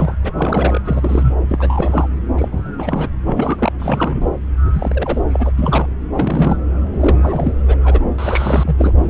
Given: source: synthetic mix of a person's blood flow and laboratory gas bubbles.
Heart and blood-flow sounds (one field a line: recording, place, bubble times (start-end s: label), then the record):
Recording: Doppler ultrasound of blood flow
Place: subclavian vein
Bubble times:
0.00-0.18 s: bubbles
0.24-0.33 s: bubbles
0.37-0.81 s: bubbles
0.85-1.34 s: bubbles
1.49-2.07 s: bubbles
2.37-3.10 s: bubbles
3.25-3.72 s: bubbles
3.79-4.29 s: bubbles
4.72-5.21 s: bubbles
5.29-5.51 s: bubbles
5.58-5.86 s: bubbles
6.10-6.57 s: bubbles
6.92-7.54 s: bubbles
7.67-7.76 s: bubbles
7.84-8.00 s: bubbles
8.18-8.93 s: bubbles
8.96-9.10 s: bubbles
From the record:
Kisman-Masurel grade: 342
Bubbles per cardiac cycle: rolling drumbeat, 9 or more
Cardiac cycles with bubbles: 100%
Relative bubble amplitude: moderate (0.250 to 0.450)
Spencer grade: 3 (all of the cardiac periods contain showers or single bubble signals, but not dominating or overriding the cardiac motion signals)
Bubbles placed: anywhere in the cardiac cycle